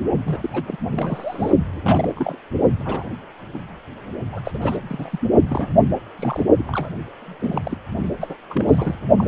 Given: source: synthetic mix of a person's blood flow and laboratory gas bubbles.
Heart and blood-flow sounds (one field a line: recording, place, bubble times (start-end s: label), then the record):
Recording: Doppler ultrasound of blood flow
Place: precordium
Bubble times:
0.25-0.50 s: bubbles
0.53-0.62 s: bubbles
0.68-0.76 s: bubbles
0.94-1.52 s: bubbles
1.72-2.38 s: bubbles
2.79-3.06 s: bubbles
3.54-3.61 s: bubbles
4.32-4.41 s: bubbles
4.44-4.52 s: bubbles
4.54-4.58 s: bubbles
4.62-4.77 s: bubbles
4.89-5.19 s: bubbles
5.48-5.68 s: bubbles
6.19-6.43 s: bubbles
6.58-6.90 s: bubbles
7.21-7.62 s: bubbles
7.64-7.78 s: bubbles
8.21-8.34 s: bubbles
8.50-8.65 s: bubbles
8.67-8.95 s: bubbles
9.17-9.28 s: bubbles
From the record:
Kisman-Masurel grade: 242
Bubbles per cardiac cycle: several, 3 to 8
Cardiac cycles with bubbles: 100%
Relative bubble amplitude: moderate (0.250 to 0.450)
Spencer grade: 3 (all of the cardiac periods contain showers or single bubble signals, but not dominating or overriding the cardiac motion signals)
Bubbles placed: only in the low amplitude regions of the cardiac cycle